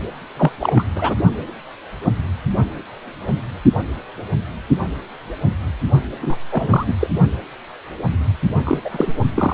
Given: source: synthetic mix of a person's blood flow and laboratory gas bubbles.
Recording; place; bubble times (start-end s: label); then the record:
Doppler ultrasound of blood flow; precordium
0.37-0.51 s: bubbles
0.59-0.83 s: bubbles
0.95-1.15 s: bubbles
6.21-6.36 s: bubbles
6.51-6.67 s: bubbles
6.71-6.94 s: bubbles
7.00-7.07 s: bubbles
8.65-8.80 s: bubbles
8.84-8.89 s: bubbles
8.92-9.12 s: bubbles
9.36-9.54 s: bubbles
From the record:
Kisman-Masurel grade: 223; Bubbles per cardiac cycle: several, 3 to 8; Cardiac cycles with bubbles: 10 to 50%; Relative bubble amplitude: loud (0.450 to 0.775); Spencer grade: 2 (many but less than half of the cardiac periods contain bubble signals, singularly or in groups); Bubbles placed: only in the low amplitude regions of the cardiac cycle